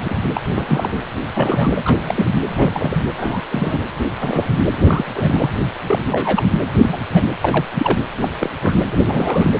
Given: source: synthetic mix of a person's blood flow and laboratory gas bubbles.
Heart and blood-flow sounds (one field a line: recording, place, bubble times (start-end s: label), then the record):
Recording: Doppler ultrasound of blood flow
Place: precordium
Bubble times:
0.00-0.14 s: bubbles
0.33-0.42 s: bubbles
0.50-0.99 s: bubbles
1.34-2.30 s: bubbles
2.43-3.00 s: bubbles
3.17-3.42 s: bubbles
3.50-3.81 s: bubbles
4.19-4.48 s: bubbles
4.76-5.05 s: bubbles
5.15-5.49 s: bubbles
5.87-6.46 s: bubbles
6.81-7.04 s: bubbles
7.13-7.23 s: bubbles
7.41-7.65 s: bubbles
7.75-8.01 s: bubbles
8.21-8.31 s: bubbles
8.39-8.51 s: bubbles
8.62-8.76 s: bubbles
8.90-9.54 s: bubbles
9.58-9.60 s: bubbles
From the record:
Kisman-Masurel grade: 242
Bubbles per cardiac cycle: several, 3 to 8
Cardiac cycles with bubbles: 100%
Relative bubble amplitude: moderate (0.250 to 0.450)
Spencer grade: 3 (all of the cardiac periods contain showers or single bubble signals, but not dominating or overriding the cardiac motion signals)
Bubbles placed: anywhere in the cardiac cycle